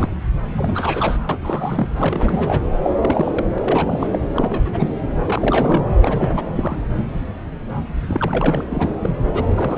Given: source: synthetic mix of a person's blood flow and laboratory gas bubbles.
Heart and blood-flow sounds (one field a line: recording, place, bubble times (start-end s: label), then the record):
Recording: Doppler ultrasound of blood flow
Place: subclavian vein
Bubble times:
0.00-0.09 s: bubbles
0.57-1.18 s: bubbles
1.29-1.38 s: bubbles
1.42-1.87 s: bubbles
1.97-2.60 s: bubbles
2.83-2.90 s: bubbles
3.01-3.45 s: bubbles
3.56-3.58 s: bubbles
3.61-4.09 s: bubbles
4.12-4.18 s: bubbles
4.33-4.94 s: bubbles
5.25-6.42 s: bubbles
6.55-6.82 s: bubbles
8.07-8.65 s: bubbles
8.70-8.95 s: bubbles
9.02-9.10 s: bubbles
9.35-9.78 s: bubbles
From the record:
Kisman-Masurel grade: 332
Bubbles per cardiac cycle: rolling drumbeat, 9 or more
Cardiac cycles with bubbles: 50 to 99%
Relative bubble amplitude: moderate (0.250 to 0.450)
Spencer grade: 3 (all of the cardiac periods contain showers or single bubble signals, but not dominating or overriding the cardiac motion signals)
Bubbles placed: anywhere in the cardiac cycle